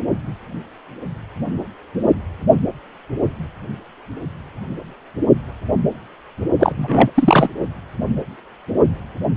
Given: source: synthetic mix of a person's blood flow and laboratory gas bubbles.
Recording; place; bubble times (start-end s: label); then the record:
Doppler ultrasound of blood flow; precordium
6.59-6.72 s: bubbles
6.77-7.11 s: bubbles
7.15-7.49 s: bubbles
From the record:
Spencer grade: 1 (occasional bubble signal discernible with the cardiac motion signal, with majority of cardiac periods free of bubbles); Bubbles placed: only in the low amplitude regions of the cardiac cycle